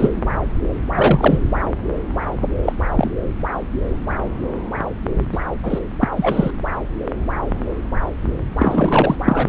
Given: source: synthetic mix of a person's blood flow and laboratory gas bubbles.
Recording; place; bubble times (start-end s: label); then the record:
Doppler ultrasound of blood flow; subclavian vein
0.00-0.10 s: bubbles
0.96-1.38 s: bubbles
2.62-2.72 s: bubbles
2.95-3.11 s: bubbles
5.32-5.38 s: bubbles
5.62-5.79 s: bubbles
6.00-6.08 s: bubbles
6.17-6.50 s: bubbles
8.58-9.16 s: bubbles
9.25-9.49 s: bubbles
From the record:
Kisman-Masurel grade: 223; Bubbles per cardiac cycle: several, 3 to 8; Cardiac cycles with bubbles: 10 to 50%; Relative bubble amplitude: loud (0.450 to 0.775); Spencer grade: 2 (many but less than half of the cardiac periods contain bubble signals, singularly or in groups); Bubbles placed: anywhere in the cardiac cycle